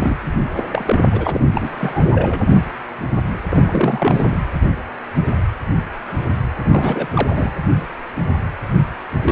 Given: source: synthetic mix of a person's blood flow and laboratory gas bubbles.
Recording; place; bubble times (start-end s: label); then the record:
Doppler ultrasound of blood flow; precordium
0.00-0.17 s: bubbles
0.55-0.64 s: bubbles
0.72-0.99 s: bubbles
1.11-1.41 s: bubbles
1.51-2.10 s: bubbles
2.14-2.42 s: bubbles
3.50-4.39 s: bubbles
6.59-7.54 s: bubbles
9.26-9.31 s: bubbles
From the record:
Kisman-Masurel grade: 332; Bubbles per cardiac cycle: rolling drumbeat, 9 or more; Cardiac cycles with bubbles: 50 to 99%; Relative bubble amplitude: moderate (0.250 to 0.450); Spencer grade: 3 (all of the cardiac periods contain showers or single bubble signals, but not dominating or overriding the cardiac motion signals); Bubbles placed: anywhere in the cardiac cycle